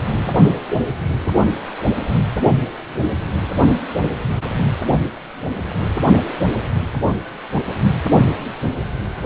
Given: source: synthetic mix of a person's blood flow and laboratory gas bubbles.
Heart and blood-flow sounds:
Doppler ultrasound of blood flow; precordium
0.12-0.52 s: bubbles
From the record:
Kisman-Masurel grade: 112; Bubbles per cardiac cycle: 1 to 2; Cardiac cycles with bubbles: 1 to 10%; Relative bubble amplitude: moderate (0.250 to 0.450); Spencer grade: 1 (occasional bubble signal discernible with the cardiac motion signal, with majority of cardiac periods free of bubbles); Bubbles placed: anywhere in the cardiac cycle

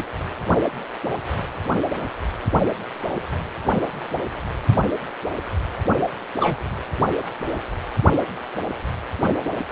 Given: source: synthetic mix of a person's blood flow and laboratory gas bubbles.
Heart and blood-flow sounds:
Doppler ultrasound of blood flow; precordium
6.39-6.57 s: bubbles
From the record:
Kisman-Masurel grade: 113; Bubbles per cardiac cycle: 1 to 2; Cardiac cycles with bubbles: 1 to 10%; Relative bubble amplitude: loud (0.450 to 0.775); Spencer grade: 1 (occasional bubble signal discernible with the cardiac motion signal, with majority of cardiac periods free of bubbles); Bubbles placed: anywhere in the cardiac cycle

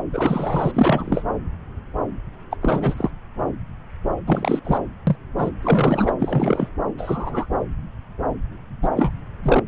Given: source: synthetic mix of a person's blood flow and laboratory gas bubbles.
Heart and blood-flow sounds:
Doppler ultrasound of blood flow; subclavian vein
0.12-0.71 s: bubbles
0.74-1.23 s: bubbles
2.51-2.56 s: bubbles
2.61-3.10 s: bubbles
4.26-4.59 s: bubbles
4.65-4.79 s: bubbles
5.07-5.16 s: bubbles
5.38-5.50 s: bubbles
5.62-6.12 s: bubbles
6.20-6.69 s: bubbles
6.98-7.46 s: bubbles
8.82-8.88 s: bubbles
8.96-9.13 s: bubbles
9.43-9.62 s: bubbles
From the record:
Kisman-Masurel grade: 232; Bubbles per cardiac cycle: several, 3 to 8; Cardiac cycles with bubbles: 50 to 99%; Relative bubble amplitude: moderate (0.250 to 0.450); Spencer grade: 3 (all of the cardiac periods contain showers or single bubble signals, but not dominating or overriding the cardiac motion signals); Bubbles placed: anywhere in the cardiac cycle

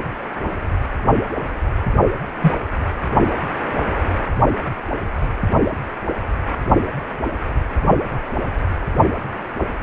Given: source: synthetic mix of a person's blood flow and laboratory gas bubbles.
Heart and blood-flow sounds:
Doppler ultrasound of blood flow; precordium
2.41-2.54 s: bubbles
From the record:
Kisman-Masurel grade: 113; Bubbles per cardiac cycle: 1 to 2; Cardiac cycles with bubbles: 1 to 10%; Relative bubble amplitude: loud (0.450 to 0.775); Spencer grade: 1 (occasional bubble signal discernible with the cardiac motion signal, with majority of cardiac periods free of bubbles); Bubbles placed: anywhere in the cardiac cycle

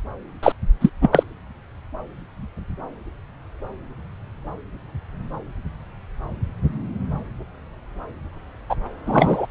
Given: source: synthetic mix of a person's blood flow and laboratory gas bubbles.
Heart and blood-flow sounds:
Doppler ultrasound of blood flow; subclavian vein
0.43-0.52 s: bubbles
0.80-0.90 s: bubbles
1.02-1.09 s: bubbles
1.11-1.23 s: bubbles
8.69-8.75 s: bubbles
9.06-9.46 s: bubbles
From the record:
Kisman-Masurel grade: 223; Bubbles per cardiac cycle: several, 3 to 8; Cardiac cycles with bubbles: 10 to 50%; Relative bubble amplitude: loud (0.450 to 0.775); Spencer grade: 2 (many but less than half of the cardiac periods contain bubble signals, singularly or in groups); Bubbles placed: anywhere in the cardiac cycle

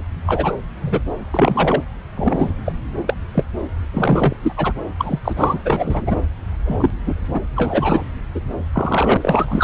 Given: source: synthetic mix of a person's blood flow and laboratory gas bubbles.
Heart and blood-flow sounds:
Doppler ultrasound of blood flow; subclavian vein
0.26-0.56 s: bubbles
0.81-1.03 s: bubbles
1.30-1.83 s: bubbles
2.12-2.54 s: bubbles
2.65-2.73 s: bubbles
3.06-3.15 s: bubbles
3.34-3.45 s: bubbles
3.93-4.36 s: bubbles
4.42-4.53 s: bubbles
4.57-4.73 s: bubbles
4.99-5.19 s: bubbles
5.24-5.59 s: bubbles
5.65-6.16 s: bubbles
6.65-6.92 s: bubbles
7.07-7.41 s: bubbles
7.55-8.02 s: bubbles
8.34-8.40 s: bubbles
8.73-9.17 s: bubbles
9.21-9.64 s: bubbles
From the record:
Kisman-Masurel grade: 243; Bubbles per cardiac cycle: several, 3 to 8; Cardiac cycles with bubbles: 100%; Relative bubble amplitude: loud (0.450 to 0.775); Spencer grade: 3 (all of the cardiac periods contain showers or single bubble signals, but not dominating or overriding the cardiac motion signals); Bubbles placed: anywhere in the cardiac cycle

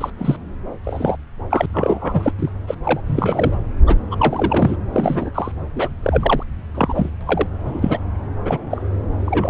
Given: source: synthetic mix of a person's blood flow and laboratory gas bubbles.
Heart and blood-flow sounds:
Doppler ultrasound of blood flow; subclavian vein
0.01-0.11 s: bubbles
0.18-0.37 s: bubbles
0.83-1.17 s: bubbles
1.51-1.66 s: bubbles
1.73-2.33 s: bubbles
2.39-2.50 s: bubbles
2.67-2.75 s: bubbles
2.83-3.00 s: bubbles
3.06-3.56 s: bubbles
3.87-3.99 s: bubbles
4.11-4.76 s: bubbles
4.92-5.31 s: bubbles
5.34-5.51 s: bubbles
5.75-5.88 s: bubbles
6.03-6.43 s: bubbles
6.75-7.09 s: bubbles
7.21-7.47 s: bubbles
7.64-7.98 s: bubbles
8.45-8.57 s: bubbles
8.71-8.82 s: bubbles
9.26-9.50 s: bubbles
From the record:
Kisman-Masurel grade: 242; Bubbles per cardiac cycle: several, 3 to 8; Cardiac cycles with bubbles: 100%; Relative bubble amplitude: moderate (0.250 to 0.450); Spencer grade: 3 (all of the cardiac periods contain showers or single bubble signals, but not dominating or overriding the cardiac motion signals); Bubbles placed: anywhere in the cardiac cycle

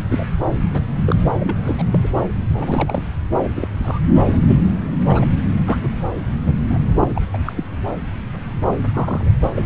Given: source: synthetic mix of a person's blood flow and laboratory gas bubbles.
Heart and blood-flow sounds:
Doppler ultrasound of blood flow; subclavian vein
0.09-0.26 s: bubbles
0.72-0.82 s: bubbles
1.05-1.16 s: bubbles
1.24-1.33 s: bubbles
1.37-1.83 s: bubbles
1.92-1.99 s: bubbles
2.03-2.08 s: bubbles
2.52-3.03 s: bubbles
3.44-3.48 s: bubbles
3.55-3.67 s: bubbles
3.82-3.99 s: bubbles
4.26-4.58 s: bubbles
5.08-5.26 s: bubbles
5.64-5.78 s: bubbles
5.83-5.88 s: bubbles
6.45-6.58 s: bubbles
6.68-6.78 s: bubbles
7.00-7.21 s: bubbles
7.33-7.38 s: bubbles
7.45-7.52 s: bubbles
7.55-7.64 s: bubbles
8.65-8.76 s: bubbles
8.93-9.32 s: bubbles
9.43-9.66 s: bubbles
From the record:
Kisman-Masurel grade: 242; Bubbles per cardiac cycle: several, 3 to 8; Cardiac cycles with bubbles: 100%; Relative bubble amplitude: moderate (0.250 to 0.450); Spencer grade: 3 (all of the cardiac periods contain showers or single bubble signals, but not dominating or overriding the cardiac motion signals); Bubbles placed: anywhere in the cardiac cycle

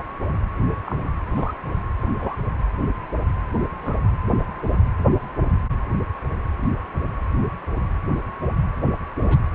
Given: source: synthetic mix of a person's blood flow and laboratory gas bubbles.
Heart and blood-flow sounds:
Doppler ultrasound of blood flow; precordium
0.85-1.19 s: bubbles
1.29-1.54 s: bubbles
2.02-2.07 s: bubbles
2.19-2.36 s: bubbles
3.82-3.95 s: bubbles
9.21-9.38 s: bubbles
From the record:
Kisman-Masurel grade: 121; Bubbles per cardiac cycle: 1 to 2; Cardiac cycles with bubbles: 10 to 50%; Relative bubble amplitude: barely perceptible (0.100 to 0.250); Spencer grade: 2 (many but less than half of the cardiac periods contain bubble signals, singularly or in groups); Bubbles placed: anywhere in the cardiac cycle

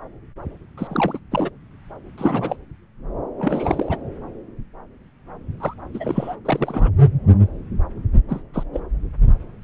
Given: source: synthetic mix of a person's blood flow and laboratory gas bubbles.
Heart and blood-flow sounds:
Doppler ultrasound of blood flow; subclavian vein
0.78-1.19 s: bubbles
1.31-1.50 s: bubbles
2.18-2.56 s: bubbles
3.38-3.98 s: bubbles
5.60-5.74 s: bubbles
5.94-6.36 s: bubbles
6.45-6.91 s: bubbles
8.28-8.41 s: bubbles
8.53-8.63 s: bubbles
8.73-8.80 s: bubbles
From the record:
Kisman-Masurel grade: 232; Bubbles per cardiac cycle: several, 3 to 8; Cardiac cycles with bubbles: 50 to 99%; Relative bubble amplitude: moderate (0.250 to 0.450); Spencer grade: 3 (all of the cardiac periods contain showers or single bubble signals, but not dominating or overriding the cardiac motion signals); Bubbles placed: anywhere in the cardiac cycle

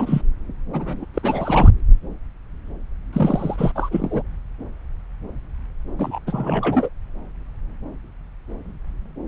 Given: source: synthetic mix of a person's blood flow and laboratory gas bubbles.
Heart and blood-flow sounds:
Doppler ultrasound of blood flow; subclavian vein
0.00-0.22 s: bubbles
0.72-1.05 s: bubbles
1.14-1.70 s: bubbles
3.12-3.71 s: bubbles
3.75-4.22 s: bubbles
5.98-6.18 s: bubbles
6.26-6.89 s: bubbles
From the record:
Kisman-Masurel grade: 332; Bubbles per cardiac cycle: rolling drumbeat, 9 or more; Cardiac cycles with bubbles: 50 to 99%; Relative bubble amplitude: moderate (0.250 to 0.450); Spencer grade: 3 (all of the cardiac periods contain showers or single bubble signals, but not dominating or overriding the cardiac motion signals); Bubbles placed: anywhere in the cardiac cycle

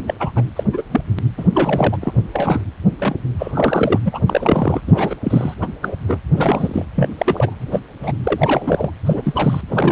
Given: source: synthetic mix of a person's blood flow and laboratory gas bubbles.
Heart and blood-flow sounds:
Doppler ultrasound of blood flow; precordium
0.07-0.14 s: bubbles
0.19-0.32 s: bubbles
0.35-0.43 s: bubbles
0.55-0.64 s: bubbles
0.73-0.82 s: bubbles
0.91-1.01 s: bubbles
1.38-1.45 s: bubbles
1.53-1.97 s: bubbles
2.01-2.14 s: bubbles
2.33-2.62 s: bubbles
3.00-3.15 s: bubbles
3.39-4.00 s: bubbles
4.04-4.21 s: bubbles
4.29-4.81 s: bubbles
4.87-5.15 s: bubbles
5.24-5.54 s: bubbles
5.61-5.67 s: bubbles
5.82-5.95 s: bubbles
6.07-6.19 s: bubbles
6.36-6.86 s: bubbles
6.95-7.08 s: bubbles
7.18-7.54 s: bubbles
7.60-7.79 s: bubbles
8.02-8.13 s: bubbles
8.23-8.90 s: bubbles
9.05-9.61 s: bubbles
9.69-9.92 s: bubbles
From the record:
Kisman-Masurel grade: 243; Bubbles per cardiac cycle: several, 3 to 8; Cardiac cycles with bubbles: 100%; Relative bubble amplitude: loud (0.450 to 0.775); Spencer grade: 3 (all of the cardiac periods contain showers or single bubble signals, but not dominating or overriding the cardiac motion signals); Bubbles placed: anywhere in the cardiac cycle

